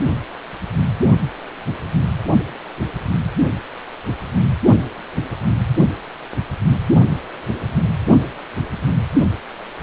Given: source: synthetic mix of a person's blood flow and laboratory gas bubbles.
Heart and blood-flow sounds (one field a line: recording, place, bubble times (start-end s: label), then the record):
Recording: Doppler ultrasound of blood flow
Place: precordium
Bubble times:
no bubbles
From the record:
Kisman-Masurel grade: 000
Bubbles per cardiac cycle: 0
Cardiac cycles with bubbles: 0%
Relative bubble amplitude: no bubbles discernible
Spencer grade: 0 (complete lack of bubble signals)